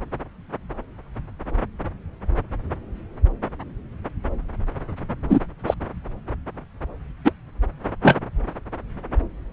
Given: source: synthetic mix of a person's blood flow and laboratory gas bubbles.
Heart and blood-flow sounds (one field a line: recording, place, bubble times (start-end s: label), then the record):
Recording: Doppler ultrasound of blood flow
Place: subclavian vein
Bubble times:
5.29-5.40 s: bubbles
5.67-5.74 s: bubbles
7.24-7.32 s: bubbles
8.02-8.16 s: bubbles
From the record:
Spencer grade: 2 (many but less than half of the cardiac periods contain bubble signals, singularly or in groups)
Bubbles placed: anywhere in the cardiac cycle